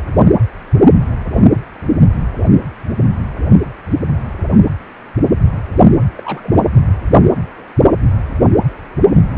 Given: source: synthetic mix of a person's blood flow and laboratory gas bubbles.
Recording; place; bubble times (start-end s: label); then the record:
Doppler ultrasound of blood flow; precordium
6.16-6.55 s: bubbles
From the record:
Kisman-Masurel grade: 111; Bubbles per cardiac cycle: 1 to 2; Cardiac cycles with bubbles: 1 to 10%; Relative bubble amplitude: barely perceptible (0.100 to 0.250); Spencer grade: 1 (occasional bubble signal discernible with the cardiac motion signal, with majority of cardiac periods free of bubbles); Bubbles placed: anywhere in the cardiac cycle